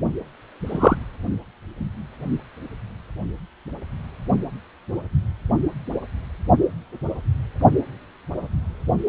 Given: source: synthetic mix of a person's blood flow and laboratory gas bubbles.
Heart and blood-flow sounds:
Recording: Doppler ultrasound of blood flow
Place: precordium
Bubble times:
0.66-0.98 s: bubbles
From the record:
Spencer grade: 1 (occasional bubble signal discernible with the cardiac motion signal, with majority of cardiac periods free of bubbles)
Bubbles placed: only in the low amplitude regions of the cardiac cycle

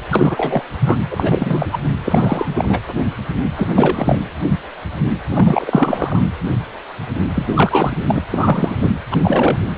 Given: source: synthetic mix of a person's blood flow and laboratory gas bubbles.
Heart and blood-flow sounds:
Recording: Doppler ultrasound of blood flow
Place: precordium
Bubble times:
0.10-0.63 s: bubbles
0.80-0.96 s: bubbles
1.10-1.78 s: bubbles
2.04-2.81 s: bubbles
3.56-4.19 s: bubbles
5.30-6.20 s: bubbles
7.35-8.19 s: bubbles
8.29-8.91 s: bubbles
9.11-9.58 s: bubbles
From the record:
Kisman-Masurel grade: 333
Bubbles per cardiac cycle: rolling drumbeat, 9 or more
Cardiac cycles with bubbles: 50 to 99%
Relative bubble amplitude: loud (0.450 to 0.775)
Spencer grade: 3 (all of the cardiac periods contain showers or single bubble signals, but not dominating or overriding the cardiac motion signals)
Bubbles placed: anywhere in the cardiac cycle

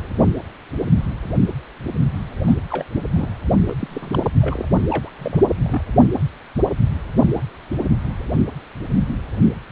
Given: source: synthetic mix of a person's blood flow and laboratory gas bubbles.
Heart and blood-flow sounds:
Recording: Doppler ultrasound of blood flow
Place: precordium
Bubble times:
2.46-2.55 s: bubbles
2.69-2.85 s: bubbles
3.11-3.29 s: bubbles
3.67-3.75 s: bubbles
3.79-4.30 s: bubbles
4.41-4.68 s: bubbles
4.90-5.09 s: bubbles
5.18-5.84 s: bubbles
From the record:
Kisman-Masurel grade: 221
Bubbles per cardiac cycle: several, 3 to 8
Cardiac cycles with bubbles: 10 to 50%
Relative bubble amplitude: barely perceptible (0.100 to 0.250)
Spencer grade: 2 (many but less than half of the cardiac periods contain bubble signals, singularly or in groups)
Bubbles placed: anywhere in the cardiac cycle

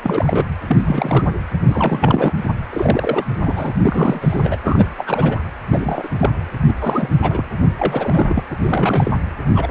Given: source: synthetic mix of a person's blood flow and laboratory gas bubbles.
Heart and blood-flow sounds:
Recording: Doppler ultrasound of blood flow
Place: precordium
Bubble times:
0.03-0.46 s: bubbles
0.68-1.25 s: bubbles
1.67-2.33 s: bubbles
2.71-3.24 s: bubbles
3.42-3.73 s: bubbles
3.76-4.56 s: bubbles
4.63-4.87 s: bubbles
4.97-5.40 s: bubbles
5.70-6.09 s: bubbles
6.18-6.30 s: bubbles
6.67-6.74 s: bubbles
6.81-7.09 s: bubbles
7.21-7.45 s: bubbles
7.77-8.44 s: bubbles
8.50-8.57 s: bubbles
8.63-9.12 s: bubbles
9.54-9.71 s: bubbles
From the record:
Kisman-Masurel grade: 343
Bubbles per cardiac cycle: rolling drumbeat, 9 or more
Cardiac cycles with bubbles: 100%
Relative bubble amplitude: loud (0.450 to 0.775)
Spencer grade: 3 (all of the cardiac periods contain showers or single bubble signals, but not dominating or overriding the cardiac motion signals)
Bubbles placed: anywhere in the cardiac cycle

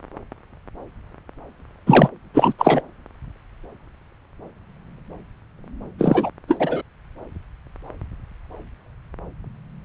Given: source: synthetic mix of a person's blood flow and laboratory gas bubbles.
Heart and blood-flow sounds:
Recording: Doppler ultrasound of blood flow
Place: subclavian vein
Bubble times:
1.86-2.08 s: bubbles
2.33-2.54 s: bubbles
2.58-2.81 s: bubbles
5.98-6.31 s: bubbles
6.48-6.82 s: bubbles
From the record:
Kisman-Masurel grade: 223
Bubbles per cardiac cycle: several, 3 to 8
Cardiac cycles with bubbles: 10 to 50%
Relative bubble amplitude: loud (0.450 to 0.775)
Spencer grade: 2 (many but less than half of the cardiac periods contain bubble signals, singularly or in groups)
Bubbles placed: anywhere in the cardiac cycle

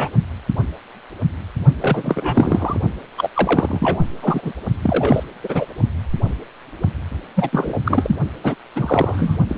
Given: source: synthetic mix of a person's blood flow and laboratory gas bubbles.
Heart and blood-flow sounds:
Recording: Doppler ultrasound of blood flow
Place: precordium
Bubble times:
0.00-0.09 s: bubbles
1.80-2.81 s: bubbles
3.17-3.29 s: bubbles
3.34-4.01 s: bubbles
4.22-4.52 s: bubbles
4.82-5.24 s: bubbles
5.43-5.66 s: bubbles
7.36-7.81 s: bubbles
7.85-8.15 s: bubbles
8.44-8.54 s: bubbles
8.76-9.37 s: bubbles
9.49-9.58 s: bubbles
From the record:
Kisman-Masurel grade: 332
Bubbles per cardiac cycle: rolling drumbeat, 9 or more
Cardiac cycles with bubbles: 50 to 99%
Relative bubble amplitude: moderate (0.250 to 0.450)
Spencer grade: 3 (all of the cardiac periods contain showers or single bubble signals, but not dominating or overriding the cardiac motion signals)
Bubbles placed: only in the low amplitude regions of the cardiac cycle

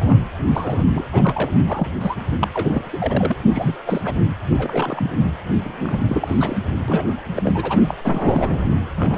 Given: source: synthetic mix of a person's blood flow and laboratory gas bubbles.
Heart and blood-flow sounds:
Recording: Doppler ultrasound of blood flow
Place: precordium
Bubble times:
0.00-0.21 s: bubbles
0.52-0.84 s: bubbles
0.92-1.04 s: bubbles
1.11-1.50 s: bubbles
1.69-1.91 s: bubbles
2.00-2.15 s: bubbles
2.40-2.48 s: bubbles
2.53-2.89 s: bubbles
2.92-3.36 s: bubbles
3.49-3.78 s: bubbles
3.85-4.01 s: bubbles
4.04-4.15 s: bubbles
4.51-5.10 s: bubbles
5.64-6.59 s: bubbles
6.88-7.17 s: bubbles
7.36-7.94 s: bubbles
8.04-8.61 s: bubbles
8.96-9.18 s: bubbles
From the record:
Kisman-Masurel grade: 342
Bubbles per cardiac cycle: rolling drumbeat, 9 or more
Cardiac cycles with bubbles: 100%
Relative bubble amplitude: moderate (0.250 to 0.450)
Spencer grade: 3 (all of the cardiac periods contain showers or single bubble signals, but not dominating or overriding the cardiac motion signals)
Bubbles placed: anywhere in the cardiac cycle

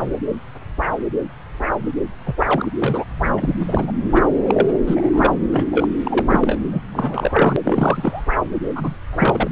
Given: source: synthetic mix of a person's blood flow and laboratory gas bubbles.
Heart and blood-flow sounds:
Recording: Doppler ultrasound of blood flow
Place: subclavian vein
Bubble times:
2.25-2.34 s: bubbles
2.38-2.71 s: bubbles
2.78-3.04 s: bubbles
3.36-3.54 s: bubbles
3.67-3.92 s: bubbles
4.12-4.22 s: bubbles
4.47-4.79 s: bubbles
4.87-5.33 s: bubbles
5.52-5.67 s: bubbles
5.71-5.88 s: bubbles
6.04-6.58 s: bubbles
6.71-6.83 s: bubbles
6.92-7.56 s: bubbles
7.65-8.24 s: bubbles
8.75-8.95 s: bubbles
9.13-9.50 s: bubbles
From the record:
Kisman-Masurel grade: 332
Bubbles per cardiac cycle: rolling drumbeat, 9 or more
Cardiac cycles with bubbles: 50 to 99%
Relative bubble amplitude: moderate (0.250 to 0.450)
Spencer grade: 3 (all of the cardiac periods contain showers or single bubble signals, but not dominating or overriding the cardiac motion signals)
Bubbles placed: anywhere in the cardiac cycle

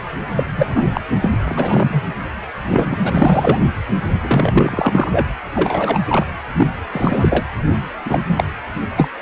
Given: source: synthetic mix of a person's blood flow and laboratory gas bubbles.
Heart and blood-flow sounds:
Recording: Doppler ultrasound of blood flow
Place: precordium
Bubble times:
0.36-0.86 s: bubbles
0.94-1.01 s: bubbles
1.22-1.31 s: bubbles
1.46-2.02 s: bubbles
2.68-2.97 s: bubbles
3.04-3.59 s: bubbles
4.21-5.27 s: bubbles
5.54-6.00 s: bubbles
6.08-6.26 s: bubbles
6.57-6.67 s: bubbles
6.92-7.46 s: bubbles
8.05-8.20 s: bubbles
8.29-8.44 s: bubbles
8.96-9.08 s: bubbles
From the record:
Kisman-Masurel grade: 243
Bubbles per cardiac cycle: several, 3 to 8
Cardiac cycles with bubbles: 100%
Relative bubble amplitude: loud (0.450 to 0.775)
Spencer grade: 3 (all of the cardiac periods contain showers or single bubble signals, but not dominating or overriding the cardiac motion signals)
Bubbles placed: anywhere in the cardiac cycle

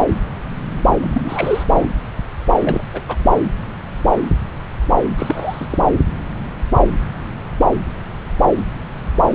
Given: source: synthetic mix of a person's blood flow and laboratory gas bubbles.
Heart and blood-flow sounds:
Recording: Doppler ultrasound of blood flow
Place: subclavian vein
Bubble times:
1.01-1.63 s: bubbles
1.74-1.86 s: bubbles
2.61-2.83 s: bubbles
2.94-3.01 s: bubbles
3.08-3.16 s: bubbles
5.17-5.67 s: bubbles
5.71-5.78 s: bubbles
From the record:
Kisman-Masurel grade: 222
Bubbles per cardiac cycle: several, 3 to 8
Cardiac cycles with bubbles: 10 to 50%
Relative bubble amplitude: moderate (0.250 to 0.450)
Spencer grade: 2 (many but less than half of the cardiac periods contain bubble signals, singularly or in groups)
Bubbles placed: anywhere in the cardiac cycle

